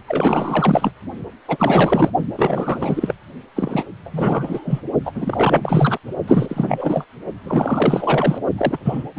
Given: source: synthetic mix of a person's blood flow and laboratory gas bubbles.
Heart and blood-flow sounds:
Doppler ultrasound of blood flow; precordium
0.08-0.92 s: bubbles
1.48-2.10 s: bubbles
2.38-3.14 s: bubbles
3.56-3.85 s: bubbles
4.04-4.82 s: bubbles
5.04-5.12 s: bubbles
5.15-5.98 s: bubbles
6.27-7.04 s: bubbles
7.44-8.38 s: bubbles
8.57-8.79 s: bubbles
8.84-9.04 s: bubbles
9.16-9.19 s: bubbles
From the record:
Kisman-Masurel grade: 444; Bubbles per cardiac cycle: continuous sound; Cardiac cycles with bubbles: 100%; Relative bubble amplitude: maximal (0.775 to 0.999); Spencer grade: 4 (maximum detectable bubble signal sounding continuously throughout systole and diastole of every cardiac period, and overriding the amplitude of the normal cardiac signals); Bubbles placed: only in the low amplitude regions of the cardiac cycle

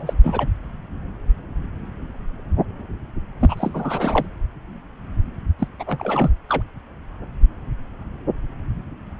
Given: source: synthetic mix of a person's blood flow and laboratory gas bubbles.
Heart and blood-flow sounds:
Doppler ultrasound of blood flow; subclavian vein
0.00-0.14 s: bubbles
0.23-0.46 s: bubbles
3.40-4.26 s: bubbles
5.58-5.68 s: bubbles
5.79-5.84 s: bubbles
5.87-6.31 s: bubbles
6.49-6.62 s: bubbles
From the record:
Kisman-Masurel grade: 332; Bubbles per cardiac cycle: rolling drumbeat, 9 or more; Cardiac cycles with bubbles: 50 to 99%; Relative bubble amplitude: moderate (0.250 to 0.450); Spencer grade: 3 (all of the cardiac periods contain showers or single bubble signals, but not dominating or overriding the cardiac motion signals); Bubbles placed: anywhere in the cardiac cycle

